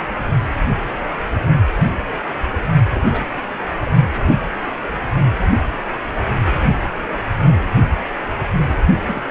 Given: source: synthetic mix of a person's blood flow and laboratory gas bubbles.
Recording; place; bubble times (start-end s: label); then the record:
Doppler ultrasound of blood flow; precordium
2.93-3.27 s: bubbles
3.85-4.21 s: bubbles
9.06-9.23 s: bubbles
From the record:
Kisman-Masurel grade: 221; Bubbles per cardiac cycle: several, 3 to 8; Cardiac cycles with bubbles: 10 to 50%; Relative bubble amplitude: barely perceptible (0.100 to 0.250); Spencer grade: 2 (many but less than half of the cardiac periods contain bubble signals, singularly or in groups); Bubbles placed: anywhere in the cardiac cycle